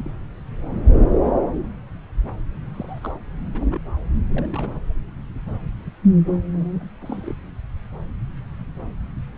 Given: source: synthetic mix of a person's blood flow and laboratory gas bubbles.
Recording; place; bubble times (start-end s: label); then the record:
Doppler ultrasound of blood flow; subclavian vein
0.00-0.28 s: bubbles
2.72-3.16 s: bubbles
3.54-3.81 s: bubbles
4.29-4.80 s: bubbles
6.54-6.64 s: bubbles
6.79-6.87 s: bubbles
7.01-7.34 s: bubbles
From the record:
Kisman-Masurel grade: 221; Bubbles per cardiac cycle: several, 3 to 8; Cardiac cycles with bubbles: 10 to 50%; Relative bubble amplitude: barely perceptible (0.100 to 0.250); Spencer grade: 2 (many but less than half of the cardiac periods contain bubble signals, singularly or in groups); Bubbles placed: anywhere in the cardiac cycle